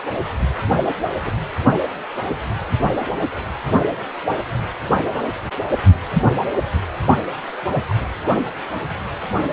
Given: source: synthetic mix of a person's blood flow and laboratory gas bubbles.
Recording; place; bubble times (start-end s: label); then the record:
Doppler ultrasound of blood flow; precordium
1.21-1.31 s: bubbles
7.74-7.83 s: bubbles
7.89-7.94 s: bubbles
From the record:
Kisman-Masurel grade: 122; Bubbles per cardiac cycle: 1 to 2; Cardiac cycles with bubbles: 10 to 50%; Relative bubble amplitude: moderate (0.250 to 0.450); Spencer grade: 2 (many but less than half of the cardiac periods contain bubble signals, singularly or in groups); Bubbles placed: only in the low amplitude regions of the cardiac cycle